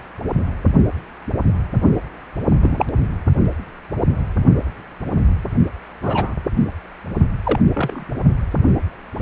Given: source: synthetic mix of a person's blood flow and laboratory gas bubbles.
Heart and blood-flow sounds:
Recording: Doppler ultrasound of blood flow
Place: precordium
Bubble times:
2.61-2.85 s: bubbles
6.02-6.35 s: bubbles
7.43-7.60 s: bubbles
7.74-8.10 s: bubbles
From the record:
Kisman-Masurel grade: 122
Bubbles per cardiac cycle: 1 to 2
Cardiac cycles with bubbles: 10 to 50%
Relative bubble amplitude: moderate (0.250 to 0.450)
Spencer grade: 2 (many but less than half of the cardiac periods contain bubble signals, singularly or in groups)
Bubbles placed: only in the low amplitude regions of the cardiac cycle

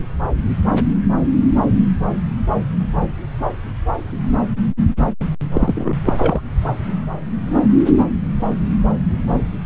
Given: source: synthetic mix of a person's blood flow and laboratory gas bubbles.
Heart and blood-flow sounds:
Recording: Doppler ultrasound of blood flow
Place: subclavian vein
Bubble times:
5.53-5.95 s: bubbles
6.05-6.12 s: bubbles
6.18-6.41 s: bubbles
From the record:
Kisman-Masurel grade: 213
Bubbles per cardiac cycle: several, 3 to 8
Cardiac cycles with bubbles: 1 to 10%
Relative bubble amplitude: loud (0.450 to 0.775)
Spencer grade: 1 (occasional bubble signal discernible with the cardiac motion signal, with majority of cardiac periods free of bubbles)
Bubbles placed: anywhere in the cardiac cycle

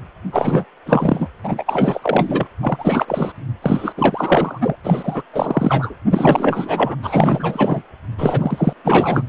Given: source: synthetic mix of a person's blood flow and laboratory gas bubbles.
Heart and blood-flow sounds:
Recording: Doppler ultrasound of blood flow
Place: precordium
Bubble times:
0.32-0.65 s: bubbles
0.86-1.29 s: bubbles
1.44-2.47 s: bubbles
2.62-3.32 s: bubbles
3.62-3.92 s: bubbles
3.97-4.75 s: bubbles
4.83-5.22 s: bubbles
5.33-5.95 s: bubbles
6.11-6.96 s: bubbles
7.02-7.83 s: bubbles
8.18-8.73 s: bubbles
8.84-9.25 s: bubbles
From the record:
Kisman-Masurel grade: 444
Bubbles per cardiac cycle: continuous sound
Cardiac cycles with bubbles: 100%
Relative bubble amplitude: maximal (0.775 to 0.999)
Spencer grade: 4 (maximum detectable bubble signal sounding continuously throughout systole and diastole of every cardiac period, and overriding the amplitude of the normal cardiac signals)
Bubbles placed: anywhere in the cardiac cycle

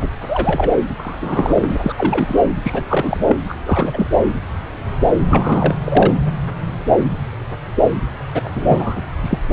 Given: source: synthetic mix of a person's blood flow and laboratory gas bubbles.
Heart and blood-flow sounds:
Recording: Doppler ultrasound of blood flow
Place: subclavian vein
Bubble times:
0.00-0.08 s: bubbles
0.22-0.70 s: bubbles
0.99-1.78 s: bubbles
1.82-1.94 s: bubbles
1.97-2.35 s: bubbles
2.65-2.83 s: bubbles
2.87-3.36 s: bubbles
3.49-3.54 s: bubbles
3.66-4.07 s: bubbles
5.30-5.77 s: bubbles
5.84-6.14 s: bubbles
8.34-8.49 s: bubbles
8.55-9.01 s: bubbles
9.22-9.38 s: bubbles
From the record:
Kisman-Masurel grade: 332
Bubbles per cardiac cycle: rolling drumbeat, 9 or more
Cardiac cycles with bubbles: 50 to 99%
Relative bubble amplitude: moderate (0.250 to 0.450)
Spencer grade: 3 (all of the cardiac periods contain showers or single bubble signals, but not dominating or overriding the cardiac motion signals)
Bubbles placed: anywhere in the cardiac cycle

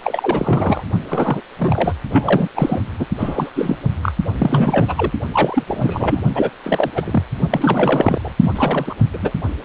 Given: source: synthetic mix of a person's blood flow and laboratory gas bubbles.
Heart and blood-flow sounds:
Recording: Doppler ultrasound of blood flow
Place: precordium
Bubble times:
0.04-0.84 s: bubbles
1.08-1.41 s: bubbles
1.58-1.93 s: bubbles
2.10-2.48 s: bubbles
2.55-2.82 s: bubbles
2.98-3.06 s: bubbles
3.18-3.50 s: bubbles
3.55-3.77 s: bubbles
4.03-4.12 s: bubbles
4.38-5.11 s: bubbles
5.32-5.64 s: bubbles
5.67-6.20 s: bubbles
6.34-6.51 s: bubbles
6.63-6.91 s: bubbles
6.95-7.22 s: bubbles
7.50-8.36 s: bubbles
8.40-8.94 s: bubbles
9.13-9.18 s: bubbles
9.22-9.31 s: bubbles
From the record:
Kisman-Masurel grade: 342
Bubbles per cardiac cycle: rolling drumbeat, 9 or more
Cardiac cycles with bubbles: 100%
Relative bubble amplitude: moderate (0.250 to 0.450)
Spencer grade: 3 (all of the cardiac periods contain showers or single bubble signals, but not dominating or overriding the cardiac motion signals)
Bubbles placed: only in the low amplitude regions of the cardiac cycle

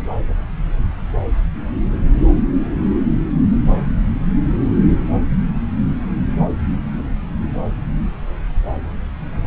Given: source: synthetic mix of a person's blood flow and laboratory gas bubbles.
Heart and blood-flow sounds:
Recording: Doppler ultrasound of blood flow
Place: subclavian vein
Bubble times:
no bubbles
From the record:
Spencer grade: 0 (complete lack of bubble signals)

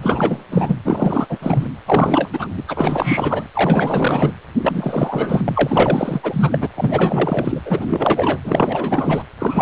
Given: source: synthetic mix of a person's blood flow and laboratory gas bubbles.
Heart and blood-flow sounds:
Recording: Doppler ultrasound of blood flow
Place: precordium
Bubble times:
0.02-0.44 s: bubbles
0.51-0.75 s: bubbles
0.84-1.39 s: bubbles
1.41-1.68 s: bubbles
1.86-2.29 s: bubbles
2.33-2.48 s: bubbles
2.56-2.63 s: bubbles
2.67-3.46 s: bubbles
3.54-4.32 s: bubbles
4.62-6.69 s: bubbles
6.77-7.62 s: bubbles
7.65-8.40 s: bubbles
8.44-9.23 s: bubbles
9.39-9.62 s: bubbles
From the record:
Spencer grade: 4 (maximum detectable bubble signal sounding continuously throughout systole and diastole of every cardiac period, and overriding the amplitude of the normal cardiac signals)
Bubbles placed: anywhere in the cardiac cycle

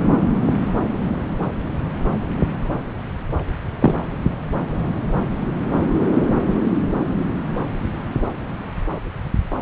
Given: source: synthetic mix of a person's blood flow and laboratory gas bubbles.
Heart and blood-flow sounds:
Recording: Doppler ultrasound of blood flow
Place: subclavian vein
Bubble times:
3.79-3.94 s: bubbles
From the record:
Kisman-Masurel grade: 113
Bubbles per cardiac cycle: 1 to 2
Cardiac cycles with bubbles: 1 to 10%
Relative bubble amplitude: loud (0.450 to 0.775)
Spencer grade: 1 (occasional bubble signal discernible with the cardiac motion signal, with majority of cardiac periods free of bubbles)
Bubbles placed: anywhere in the cardiac cycle

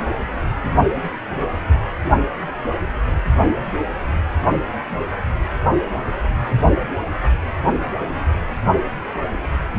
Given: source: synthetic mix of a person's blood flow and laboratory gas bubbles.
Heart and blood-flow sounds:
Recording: Doppler ultrasound of blood flow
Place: precordium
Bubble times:
no bubbles
From the record:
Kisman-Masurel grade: 000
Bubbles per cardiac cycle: 0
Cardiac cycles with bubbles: 0%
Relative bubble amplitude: no bubbles discernible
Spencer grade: 0 (complete lack of bubble signals)

